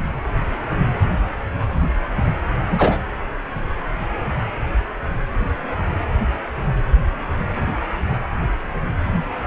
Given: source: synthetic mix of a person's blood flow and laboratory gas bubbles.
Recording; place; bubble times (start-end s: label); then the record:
Doppler ultrasound of blood flow; precordium
2.71-2.97 s: bubbles
From the record:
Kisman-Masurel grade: 113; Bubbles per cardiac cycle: 1 to 2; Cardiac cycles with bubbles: 1 to 10%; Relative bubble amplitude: loud (0.450 to 0.775); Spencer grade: 1 (occasional bubble signal discernible with the cardiac motion signal, with majority of cardiac periods free of bubbles); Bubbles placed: anywhere in the cardiac cycle